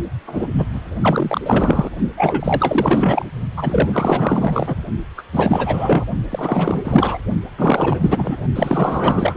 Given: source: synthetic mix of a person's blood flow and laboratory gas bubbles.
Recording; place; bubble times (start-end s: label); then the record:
Doppler ultrasound of blood flow; precordium
0.27-0.47 s: bubbles
0.54-0.65 s: bubbles
0.74-0.80 s: bubbles
1.01-1.41 s: bubbles
1.44-1.90 s: bubbles
2.17-3.25 s: bubbles
3.56-4.76 s: bubbles
5.17-5.22 s: bubbles
5.32-6.04 s: bubbles
6.29-7.19 s: bubbles
7.58-8.37 s: bubbles
8.54-9.37 s: bubbles
From the record:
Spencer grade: 4 (maximum detectable bubble signal sounding continuously throughout systole and diastole of every cardiac period, and overriding the amplitude of the normal cardiac signals); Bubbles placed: only in the low amplitude regions of the cardiac cycle